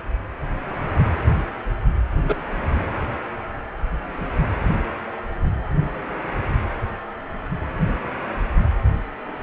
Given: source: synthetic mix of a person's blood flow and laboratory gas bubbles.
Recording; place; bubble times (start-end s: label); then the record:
Doppler ultrasound of blood flow; precordium
2.29-2.35 s: bubbles
From the record:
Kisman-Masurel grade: 113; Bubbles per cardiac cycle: 1 to 2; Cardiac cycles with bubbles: 1 to 10%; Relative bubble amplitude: loud (0.450 to 0.775); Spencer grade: 1 (occasional bubble signal discernible with the cardiac motion signal, with majority of cardiac periods free of bubbles); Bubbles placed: anywhere in the cardiac cycle